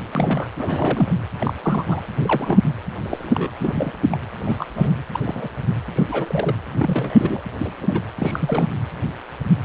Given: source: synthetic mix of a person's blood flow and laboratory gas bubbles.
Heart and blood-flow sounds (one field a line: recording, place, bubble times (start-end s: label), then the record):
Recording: Doppler ultrasound of blood flow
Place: precordium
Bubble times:
0.12-0.47 s: bubbles
0.57-1.14 s: bubbles
1.40-1.54 s: bubbles
1.62-2.02 s: bubbles
2.21-2.60 s: bubbles
3.02-3.51 s: bubbles
3.60-3.92 s: bubbles
4.11-4.19 s: bubbles
4.44-4.65 s: bubbles
4.74-4.94 s: bubbles
5.12-5.19 s: bubbles
5.24-5.48 s: bubbles
5.95-6.03 s: bubbles
6.08-6.54 s: bubbles
6.71-7.40 s: bubbles
7.58-7.74 s: bubbles
7.79-8.11 s: bubbles
8.20-8.67 s: bubbles
From the record:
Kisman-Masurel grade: 232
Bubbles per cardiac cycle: several, 3 to 8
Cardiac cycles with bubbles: 50 to 99%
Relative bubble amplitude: moderate (0.250 to 0.450)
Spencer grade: 3 (all of the cardiac periods contain showers or single bubble signals, but not dominating or overriding the cardiac motion signals)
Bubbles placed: anywhere in the cardiac cycle